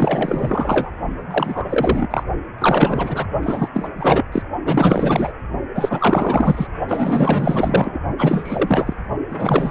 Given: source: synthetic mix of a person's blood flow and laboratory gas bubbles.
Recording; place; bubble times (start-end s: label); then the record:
Doppler ultrasound of blood flow; precordium
0.00-0.90 s: bubbles
1.31-2.24 s: bubbles
2.58-3.26 s: bubbles
3.43-3.68 s: bubbles
3.74-3.88 s: bubbles
3.97-4.25 s: bubbles
4.32-4.42 s: bubbles
4.66-5.33 s: bubbles
5.75-6.67 s: bubbles
6.88-8.00 s: bubbles
8.18-8.93 s: bubbles
9.29-9.71 s: bubbles
From the record:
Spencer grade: 4 (maximum detectable bubble signal sounding continuously throughout systole and diastole of every cardiac period, and overriding the amplitude of the normal cardiac signals); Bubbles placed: only in the low amplitude regions of the cardiac cycle